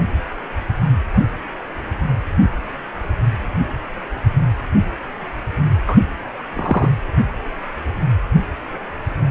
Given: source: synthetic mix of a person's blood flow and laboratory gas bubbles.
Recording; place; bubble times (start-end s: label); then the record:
Doppler ultrasound of blood flow; precordium
5.88-5.96 s: bubbles
6.56-6.89 s: bubbles
From the record:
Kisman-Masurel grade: 113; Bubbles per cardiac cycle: 1 to 2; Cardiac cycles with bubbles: 1 to 10%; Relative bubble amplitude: loud (0.450 to 0.775); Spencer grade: 1 (occasional bubble signal discernible with the cardiac motion signal, with majority of cardiac periods free of bubbles); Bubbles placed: anywhere in the cardiac cycle